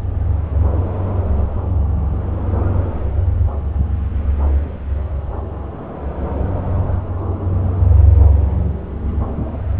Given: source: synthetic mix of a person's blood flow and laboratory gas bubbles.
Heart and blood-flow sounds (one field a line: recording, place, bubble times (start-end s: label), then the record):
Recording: Doppler ultrasound of blood flow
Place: subclavian vein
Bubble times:
no bubbles
From the record:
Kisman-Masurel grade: 000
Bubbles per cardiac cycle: 0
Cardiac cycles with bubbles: 0%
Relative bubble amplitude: no bubbles discernible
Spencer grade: 0 (complete lack of bubble signals)